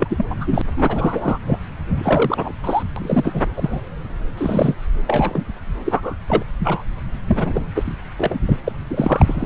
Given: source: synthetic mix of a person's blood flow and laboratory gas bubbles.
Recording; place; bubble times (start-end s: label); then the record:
Doppler ultrasound of blood flow; subclavian vein
0.00-0.25 s: bubbles
0.29-0.61 s: bubbles
0.77-1.38 s: bubbles
1.47-1.60 s: bubbles
1.96-2.52 s: bubbles
2.63-2.83 s: bubbles
2.96-3.42 s: bubbles
3.56-3.81 s: bubbles
4.37-4.75 s: bubbles
5.07-5.45 s: bubbles
5.85-6.16 s: bubbles
6.26-6.42 s: bubbles
6.60-6.82 s: bubbles
7.27-7.62 s: bubbles
7.75-7.95 s: bubbles
8.18-8.39 s: bubbles
8.46-8.58 s: bubbles
8.64-8.72 s: bubbles
8.91-9.46 s: bubbles
From the record:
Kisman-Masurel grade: 342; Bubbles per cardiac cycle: rolling drumbeat, 9 or more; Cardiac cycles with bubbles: 100%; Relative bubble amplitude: moderate (0.250 to 0.450); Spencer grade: 3 (all of the cardiac periods contain showers or single bubble signals, but not dominating or overriding the cardiac motion signals); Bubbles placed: anywhere in the cardiac cycle